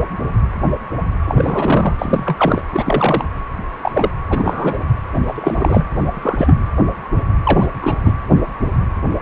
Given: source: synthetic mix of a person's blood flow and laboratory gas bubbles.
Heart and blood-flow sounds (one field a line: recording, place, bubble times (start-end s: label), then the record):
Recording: Doppler ultrasound of blood flow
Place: precordium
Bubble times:
1.25-1.95 s: bubbles
1.99-2.62 s: bubbles
2.73-3.25 s: bubbles
3.82-4.10 s: bubbles
4.30-4.85 s: bubbles
5.12-5.20 s: bubbles
5.26-5.85 s: bubbles
6.09-6.56 s: bubbles
7.43-7.67 s: bubbles
7.80-7.96 s: bubbles
8.04-8.12 s: bubbles
From the record:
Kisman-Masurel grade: 233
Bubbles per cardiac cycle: several, 3 to 8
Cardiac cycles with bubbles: 50 to 99%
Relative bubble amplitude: loud (0.450 to 0.775)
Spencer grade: 3 (all of the cardiac periods contain showers or single bubble signals, but not dominating or overriding the cardiac motion signals)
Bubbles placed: anywhere in the cardiac cycle